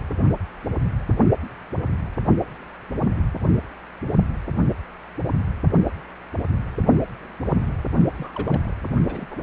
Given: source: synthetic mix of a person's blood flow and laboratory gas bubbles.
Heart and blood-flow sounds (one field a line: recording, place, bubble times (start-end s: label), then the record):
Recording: Doppler ultrasound of blood flow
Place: precordium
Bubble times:
8.16-8.73 s: bubbles
9.08-9.26 s: bubbles
9.30-9.43 s: bubbles
From the record:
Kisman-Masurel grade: 211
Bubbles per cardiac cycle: several, 3 to 8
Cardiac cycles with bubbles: 1 to 10%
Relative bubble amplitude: barely perceptible (0.100 to 0.250)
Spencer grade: 1 (occasional bubble signal discernible with the cardiac motion signal, with majority of cardiac periods free of bubbles)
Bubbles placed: only in the low amplitude regions of the cardiac cycle